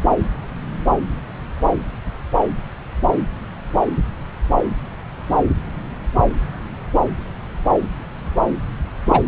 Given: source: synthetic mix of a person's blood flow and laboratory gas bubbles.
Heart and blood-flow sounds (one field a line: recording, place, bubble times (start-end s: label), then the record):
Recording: Doppler ultrasound of blood flow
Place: subclavian vein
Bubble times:
9.05-9.21 s: bubbles
From the record:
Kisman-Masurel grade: 113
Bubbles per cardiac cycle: 1 to 2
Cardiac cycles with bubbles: 1 to 10%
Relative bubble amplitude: loud (0.450 to 0.775)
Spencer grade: 1 (occasional bubble signal discernible with the cardiac motion signal, with majority of cardiac periods free of bubbles)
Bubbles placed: anywhere in the cardiac cycle